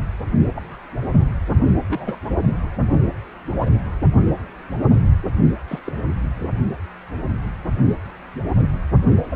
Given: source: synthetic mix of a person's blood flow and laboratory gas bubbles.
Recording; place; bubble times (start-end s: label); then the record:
Doppler ultrasound of blood flow; precordium
0.53-0.78 s: bubbles
1.10-1.23 s: bubbles
1.88-2.16 s: bubbles
3.61-3.69 s: bubbles
5.67-5.79 s: bubbles
5.85-5.92 s: bubbles
8.56-8.70 s: bubbles
9.29-9.36 s: bubbles
From the record:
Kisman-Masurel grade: 121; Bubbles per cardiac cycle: 1 to 2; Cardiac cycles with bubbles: 10 to 50%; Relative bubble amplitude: barely perceptible (0.100 to 0.250); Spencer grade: 2 (many but less than half of the cardiac periods contain bubble signals, singularly or in groups); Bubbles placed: anywhere in the cardiac cycle